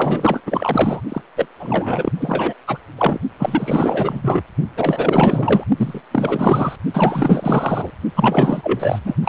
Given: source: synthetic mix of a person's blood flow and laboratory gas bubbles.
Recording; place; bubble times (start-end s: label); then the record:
Doppler ultrasound of blood flow; precordium
0.00-0.41 s: bubbles
0.46-1.01 s: bubbles
1.08-1.22 s: bubbles
1.36-1.48 s: bubbles
1.58-2.12 s: bubbles
2.20-2.54 s: bubbles
2.67-2.78 s: bubbles
2.97-3.19 s: bubbles
3.38-4.41 s: bubbles
4.76-5.65 s: bubbles
5.76-6.00 s: bubbles
6.11-6.76 s: bubbles
6.93-7.90 s: bubbles
8.15-8.99 s: bubbles
9.04-9.14 s: bubbles
9.23-9.28 s: bubbles
From the record:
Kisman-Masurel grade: 444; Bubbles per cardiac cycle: continuous sound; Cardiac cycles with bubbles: 100%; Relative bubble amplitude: maximal (0.775 to 0.999); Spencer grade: 4 (maximum detectable bubble signal sounding continuously throughout systole and diastole of every cardiac period, and overriding the amplitude of the normal cardiac signals); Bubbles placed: only in the low amplitude regions of the cardiac cycle